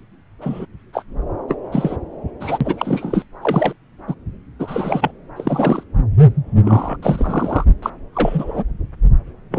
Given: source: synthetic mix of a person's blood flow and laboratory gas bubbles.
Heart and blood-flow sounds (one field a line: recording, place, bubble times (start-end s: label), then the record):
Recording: Doppler ultrasound of blood flow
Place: subclavian vein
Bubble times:
0.41-0.66 s: bubbles
0.93-1.03 s: bubbles
1.48-1.56 s: bubbles
1.72-1.96 s: bubbles
2.40-2.58 s: bubbles
2.60-3.23 s: bubbles
3.42-3.73 s: bubbles
4.08-4.14 s: bubbles
4.59-5.11 s: bubbles
5.36-5.83 s: bubbles
6.64-6.96 s: bubbles
7.02-7.64 s: bubbles
7.82-7.90 s: bubbles
8.13-8.64 s: bubbles
9.51-9.59 s: bubbles
From the record:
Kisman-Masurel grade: 243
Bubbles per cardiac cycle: several, 3 to 8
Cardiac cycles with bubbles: 100%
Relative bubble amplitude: loud (0.450 to 0.775)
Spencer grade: 3 (all of the cardiac periods contain showers or single bubble signals, but not dominating or overriding the cardiac motion signals)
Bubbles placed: anywhere in the cardiac cycle